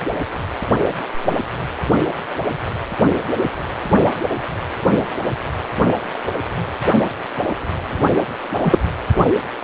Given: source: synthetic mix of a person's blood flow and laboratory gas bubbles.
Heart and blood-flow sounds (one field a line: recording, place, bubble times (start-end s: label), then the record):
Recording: Doppler ultrasound of blood flow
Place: precordium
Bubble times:
8.62-8.79 s: bubbles
From the record:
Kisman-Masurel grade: 113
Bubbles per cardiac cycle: 1 to 2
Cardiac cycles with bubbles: 1 to 10%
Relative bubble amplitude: loud (0.450 to 0.775)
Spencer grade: 1 (occasional bubble signal discernible with the cardiac motion signal, with majority of cardiac periods free of bubbles)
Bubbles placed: only in the low amplitude regions of the cardiac cycle